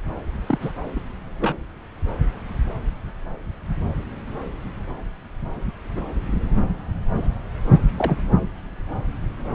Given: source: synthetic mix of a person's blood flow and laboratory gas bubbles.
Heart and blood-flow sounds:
Doppler ultrasound of blood flow; subclavian vein
0.46-0.71 s: bubbles
0.95-1.00 s: bubbles
1.40-1.56 s: bubbles
5.95-6.00 s: bubbles
7.17-7.28 s: bubbles
7.97-8.21 s: bubbles
From the record:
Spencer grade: 2 (many but less than half of the cardiac periods contain bubble signals, singularly or in groups); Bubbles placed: anywhere in the cardiac cycle

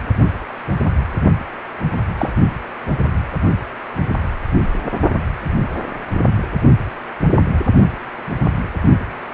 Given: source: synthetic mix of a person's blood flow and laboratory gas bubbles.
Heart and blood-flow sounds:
Doppler ultrasound of blood flow; precordium
2.18-2.31 s: bubbles
From the record:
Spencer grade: 2 (many but less than half of the cardiac periods contain bubble signals, singularly or in groups); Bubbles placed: only in the low amplitude regions of the cardiac cycle

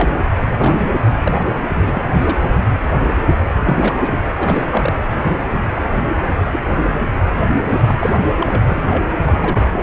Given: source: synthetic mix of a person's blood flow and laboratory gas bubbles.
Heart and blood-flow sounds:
Doppler ultrasound of blood flow; precordium
0.00-0.10 s: bubbles
0.59-0.91 s: bubbles
1.07-1.46 s: bubbles
1.79-2.36 s: bubbles
2.42-2.60 s: bubbles
3.60-4.18 s: bubbles
4.38-4.96 s: bubbles
5.14-5.43 s: bubbles
5.52-5.59 s: bubbles
6.38-6.59 s: bubbles
6.88-7.00 s: bubbles
7.67-7.96 s: bubbles
8.00-8.28 s: bubbles
8.38-8.61 s: bubbles
8.67-8.83 s: bubbles
8.89-9.04 s: bubbles
9.26-9.83 s: bubbles
From the record:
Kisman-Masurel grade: 232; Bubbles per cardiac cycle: several, 3 to 8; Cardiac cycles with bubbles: 50 to 99%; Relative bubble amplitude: moderate (0.250 to 0.450); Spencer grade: 3 (all of the cardiac periods contain showers or single bubble signals, but not dominating or overriding the cardiac motion signals); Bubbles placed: anywhere in the cardiac cycle

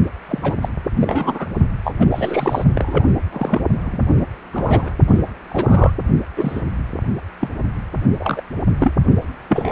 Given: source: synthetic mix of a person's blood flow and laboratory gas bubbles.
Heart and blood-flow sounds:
Doppler ultrasound of blood flow; precordium
0.28-0.56 s: bubbles
0.61-0.68 s: bubbles
1.00-1.47 s: bubbles
1.84-1.93 s: bubbles
1.99-2.64 s: bubbles
2.75-3.07 s: bubbles
3.33-3.61 s: bubbles
3.85-3.98 s: bubbles
4.14-4.25 s: bubbles
4.52-4.91 s: bubbles
5.08-5.20 s: bubbles
5.49-5.92 s: bubbles
6.37-6.61 s: bubbles
7.40-7.49 s: bubbles
8.20-8.42 s: bubbles
8.79-8.93 s: bubbles
9.49-9.72 s: bubbles
From the record:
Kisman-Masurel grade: 242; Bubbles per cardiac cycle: several, 3 to 8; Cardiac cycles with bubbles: 100%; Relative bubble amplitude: moderate (0.250 to 0.450); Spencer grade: 3 (all of the cardiac periods contain showers or single bubble signals, but not dominating or overriding the cardiac motion signals); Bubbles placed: only in the low amplitude regions of the cardiac cycle

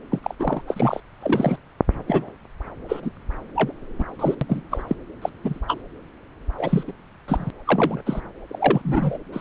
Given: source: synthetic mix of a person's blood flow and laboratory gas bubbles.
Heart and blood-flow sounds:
Doppler ultrasound of blood flow; subclavian vein
0.11-0.19 s: bubbles
0.23-0.35 s: bubbles
0.39-0.62 s: bubbles
0.67-1.00 s: bubbles
1.20-1.58 s: bubbles
2.08-2.28 s: bubbles
2.88-3.00 s: bubbles
3.03-3.11 s: bubbles
3.56-3.72 s: bubbles
3.99-4.04 s: bubbles
4.19-4.35 s: bubbles
4.41-4.46 s: bubbles
4.49-4.61 s: bubbles
4.71-4.83 s: bubbles
4.88-4.96 s: bubbles
5.21-5.29 s: bubbles
5.44-5.60 s: bubbles
5.67-5.81 s: bubbles
6.58-6.83 s: bubbles
6.88-6.92 s: bubbles
7.28-7.50 s: bubbles
7.65-8.01 s: bubbles
8.05-8.21 s: bubbles
8.47-9.17 s: bubbles
9.32-9.41 s: bubbles
From the record:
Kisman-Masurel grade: 242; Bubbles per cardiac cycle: several, 3 to 8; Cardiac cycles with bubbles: 100%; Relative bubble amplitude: moderate (0.250 to 0.450); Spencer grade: 3 (all of the cardiac periods contain showers or single bubble signals, but not dominating or overriding the cardiac motion signals); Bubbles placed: anywhere in the cardiac cycle

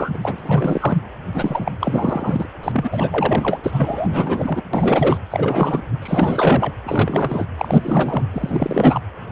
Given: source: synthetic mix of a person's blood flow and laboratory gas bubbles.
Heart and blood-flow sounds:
Doppler ultrasound of blood flow; precordium
0.00-0.18 s: bubbles
0.22-0.99 s: bubbles
1.31-1.72 s: bubbles
1.81-2.46 s: bubbles
2.63-4.62 s: bubbles
4.73-5.19 s: bubbles
5.30-5.83 s: bubbles
6.02-6.71 s: bubbles
6.83-7.46 s: bubbles
7.58-8.25 s: bubbles
8.33-9.02 s: bubbles
9.29-9.32 s: bubbles
From the record:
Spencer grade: 4 (maximum detectable bubble signal sounding continuously throughout systole and diastole of every cardiac period, and overriding the amplitude of the normal cardiac signals); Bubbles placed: anywhere in the cardiac cycle

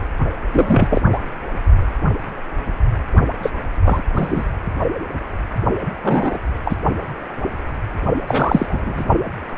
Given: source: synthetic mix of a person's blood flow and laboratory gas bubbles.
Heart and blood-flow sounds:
Doppler ultrasound of blood flow; precordium
0.52-1.01 s: bubbles
1.12-1.18 s: bubbles
3.43-3.51 s: bubbles
3.84-4.02 s: bubbles
4.15-4.45 s: bubbles
6.03-6.38 s: bubbles
6.65-6.75 s: bubbles
8.27-9.04 s: bubbles
From the record:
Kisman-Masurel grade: 223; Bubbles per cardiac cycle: several, 3 to 8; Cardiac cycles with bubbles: 10 to 50%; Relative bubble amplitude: loud (0.450 to 0.775); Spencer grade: 2 (many but less than half of the cardiac periods contain bubble signals, singularly or in groups); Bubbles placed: only in the low amplitude regions of the cardiac cycle

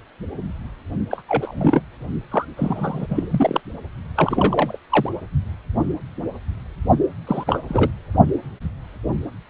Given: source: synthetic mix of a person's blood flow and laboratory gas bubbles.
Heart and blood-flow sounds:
Doppler ultrasound of blood flow; precordium
1.10-1.22 s: bubbles
1.28-1.81 s: bubbles
2.31-2.46 s: bubbles
2.57-3.61 s: bubbles
4.16-4.78 s: bubbles
4.90-5.11 s: bubbles
7.27-7.44 s: bubbles
7.47-7.60 s: bubbles
7.69-7.91 s: bubbles
From the record:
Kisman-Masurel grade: 232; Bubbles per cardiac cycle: several, 3 to 8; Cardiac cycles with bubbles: 50 to 99%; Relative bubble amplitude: moderate (0.250 to 0.450); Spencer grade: 3 (all of the cardiac periods contain showers or single bubble signals, but not dominating or overriding the cardiac motion signals); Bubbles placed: only in the low amplitude regions of the cardiac cycle

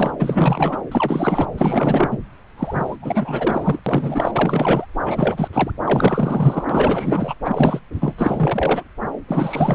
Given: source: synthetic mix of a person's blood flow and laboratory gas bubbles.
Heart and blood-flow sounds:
Doppler ultrasound of blood flow; subclavian vein
0.00-0.10 s: bubbles
0.18-0.77 s: bubbles
0.91-1.52 s: bubbles
1.57-2.19 s: bubbles
2.57-2.96 s: bubbles
3.01-3.79 s: bubbles
3.86-4.87 s: bubbles
5.04-5.48 s: bubbles
5.53-5.71 s: bubbles
5.83-6.65 s: bubbles
6.69-7.35 s: bubbles
7.43-7.79 s: bubbles
7.94-8.13 s: bubbles
8.17-8.84 s: bubbles
9.28-9.75 s: bubbles
From the record:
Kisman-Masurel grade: 444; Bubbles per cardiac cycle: continuous sound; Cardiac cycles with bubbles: 100%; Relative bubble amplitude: maximal (0.775 to 0.999); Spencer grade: 4 (maximum detectable bubble signal sounding continuously throughout systole and diastole of every cardiac period, and overriding the amplitude of the normal cardiac signals); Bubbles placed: anywhere in the cardiac cycle

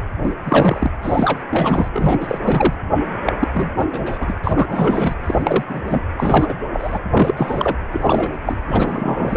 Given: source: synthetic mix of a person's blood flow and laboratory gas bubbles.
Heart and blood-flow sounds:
Doppler ultrasound of blood flow; precordium
0.23-0.35 s: bubbles
0.45-0.91 s: bubbles
1.01-1.44 s: bubbles
1.50-1.89 s: bubbles
1.93-2.74 s: bubbles
3.26-3.33 s: bubbles
3.40-3.48 s: bubbles
3.54-3.86 s: bubbles
3.92-4.34 s: bubbles
4.44-5.15 s: bubbles
5.24-5.65 s: bubbles
5.69-5.82 s: bubbles
5.86-6.02 s: bubbles
6.17-6.54 s: bubbles
6.73-6.99 s: bubbles
7.12-7.76 s: bubbles
7.92-8.38 s: bubbles
8.46-8.56 s: bubbles
8.67-9.37 s: bubbles
From the record:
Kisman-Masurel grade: 343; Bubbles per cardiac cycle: rolling drumbeat, 9 or more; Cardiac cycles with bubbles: 100%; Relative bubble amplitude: loud (0.450 to 0.775); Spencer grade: 3 (all of the cardiac periods contain showers or single bubble signals, but not dominating or overriding the cardiac motion signals); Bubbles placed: anywhere in the cardiac cycle

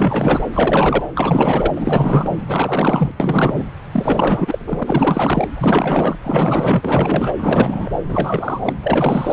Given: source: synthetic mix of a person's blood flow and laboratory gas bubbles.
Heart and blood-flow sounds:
Doppler ultrasound of blood flow; subclavian vein
0.00-0.45 s: bubbles
0.53-1.03 s: bubbles
1.15-1.73 s: bubbles
1.75-2.31 s: bubbles
2.44-3.11 s: bubbles
3.19-3.65 s: bubbles
3.91-5.49 s: bubbles
5.61-6.16 s: bubbles
6.22-7.35 s: bubbles
7.38-7.91 s: bubbles
8.08-8.62 s: bubbles
8.64-8.74 s: bubbles
8.83-9.33 s: bubbles
From the record:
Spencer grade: 4 (maximum detectable bubble signal sounding continuously throughout systole and diastole of every cardiac period, and overriding the amplitude of the normal cardiac signals); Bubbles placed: anywhere in the cardiac cycle

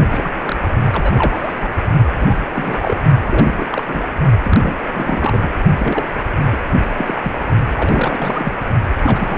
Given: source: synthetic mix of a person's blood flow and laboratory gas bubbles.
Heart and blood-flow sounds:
Doppler ultrasound of blood flow; precordium
0.10-0.31 s: bubbles
0.34-0.38 s: bubbles
0.42-0.56 s: bubbles
0.92-1.68 s: bubbles
2.18-2.43 s: bubbles
2.54-3.03 s: bubbles
3.25-3.66 s: bubbles
3.71-4.07 s: bubbles
4.44-4.60 s: bubbles
4.62-4.77 s: bubbles
4.93-5.50 s: bubbles
5.76-6.05 s: bubbles
6.52-6.57 s: bubbles
6.97-7.21 s: bubbles
7.24-7.32 s: bubbles
7.76-8.53 s: bubbles
8.98-9.38 s: bubbles
From the record:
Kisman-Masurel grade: 342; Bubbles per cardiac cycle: rolling drumbeat, 9 or more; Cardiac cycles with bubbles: 100%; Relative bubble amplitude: moderate (0.250 to 0.450); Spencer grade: 3 (all of the cardiac periods contain showers or single bubble signals, but not dominating or overriding the cardiac motion signals); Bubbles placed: only in the low amplitude regions of the cardiac cycle

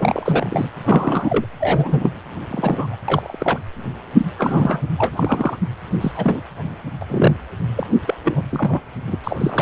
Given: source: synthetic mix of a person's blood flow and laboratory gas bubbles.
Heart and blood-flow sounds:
Doppler ultrasound of blood flow; precordium
0.00-0.69 s: bubbles
0.83-1.46 s: bubbles
1.60-2.10 s: bubbles
2.50-2.96 s: bubbles
3.08-3.62 s: bubbles
4.18-4.26 s: bubbles
4.38-4.82 s: bubbles
4.96-5.57 s: bubbles
6.00-6.12 s: bubbles
6.16-6.41 s: bubbles
7.01-7.05 s: bubbles
7.09-7.35 s: bubbles
7.76-7.87 s: bubbles
8.07-8.15 s: bubbles
8.24-8.47 s: bubbles
8.51-8.80 s: bubbles
9.07-9.18 s: bubbles
9.24-9.62 s: bubbles
From the record:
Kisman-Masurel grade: 242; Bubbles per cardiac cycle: several, 3 to 8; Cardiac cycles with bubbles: 100%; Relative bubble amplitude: moderate (0.250 to 0.450); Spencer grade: 3 (all of the cardiac periods contain showers or single bubble signals, but not dominating or overriding the cardiac motion signals); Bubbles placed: anywhere in the cardiac cycle

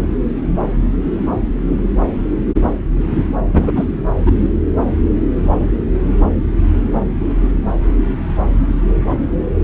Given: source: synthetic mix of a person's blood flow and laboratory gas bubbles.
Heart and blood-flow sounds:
Doppler ultrasound of blood flow; subclavian vein
3.53-3.71 s: bubbles
3.75-3.85 s: bubbles
4.25-4.31 s: bubbles
From the record:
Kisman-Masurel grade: 213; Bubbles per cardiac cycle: several, 3 to 8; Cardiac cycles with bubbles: 1 to 10%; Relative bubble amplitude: loud (0.450 to 0.775); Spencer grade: 1 (occasional bubble signal discernible with the cardiac motion signal, with majority of cardiac periods free of bubbles); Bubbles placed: anywhere in the cardiac cycle

